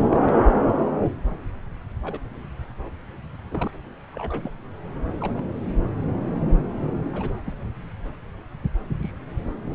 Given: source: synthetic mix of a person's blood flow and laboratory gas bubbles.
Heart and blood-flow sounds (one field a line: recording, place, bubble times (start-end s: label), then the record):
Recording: Doppler ultrasound of blood flow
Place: subclavian vein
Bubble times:
0.01-0.34 s: bubbles
2.04-2.19 s: bubbles
3.51-3.71 s: bubbles
4.14-4.50 s: bubbles
5.20-5.43 s: bubbles
7.12-7.38 s: bubbles
7.46-7.52 s: bubbles
9.03-9.11 s: bubbles
From the record:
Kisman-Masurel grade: 121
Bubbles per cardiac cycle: 1 to 2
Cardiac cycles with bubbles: 10 to 50%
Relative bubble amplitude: barely perceptible (0.100 to 0.250)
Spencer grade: 2 (many but less than half of the cardiac periods contain bubble signals, singularly or in groups)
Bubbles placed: anywhere in the cardiac cycle